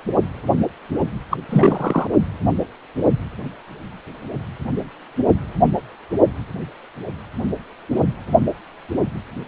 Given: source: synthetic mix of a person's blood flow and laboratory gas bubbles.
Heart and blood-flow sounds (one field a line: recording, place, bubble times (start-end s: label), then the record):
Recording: Doppler ultrasound of blood flow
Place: precordium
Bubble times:
1.30-1.38 s: bubbles
1.49-2.07 s: bubbles
From the record:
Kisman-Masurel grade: 223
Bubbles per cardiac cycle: several, 3 to 8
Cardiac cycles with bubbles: 10 to 50%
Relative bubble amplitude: loud (0.450 to 0.775)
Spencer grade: 2 (many but less than half of the cardiac periods contain bubble signals, singularly or in groups)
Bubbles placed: only in the low amplitude regions of the cardiac cycle